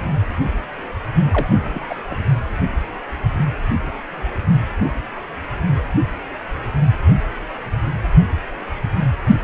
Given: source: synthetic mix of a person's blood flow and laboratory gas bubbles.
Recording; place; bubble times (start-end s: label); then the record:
Doppler ultrasound of blood flow; precordium
1.32-1.86 s: bubbles
1.89-1.96 s: bubbles
2.10-2.16 s: bubbles
From the record:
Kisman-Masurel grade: 212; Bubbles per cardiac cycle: several, 3 to 8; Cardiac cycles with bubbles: 1 to 10%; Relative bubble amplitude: moderate (0.250 to 0.450); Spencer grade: 1 (occasional bubble signal discernible with the cardiac motion signal, with majority of cardiac periods free of bubbles); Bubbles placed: only in the low amplitude regions of the cardiac cycle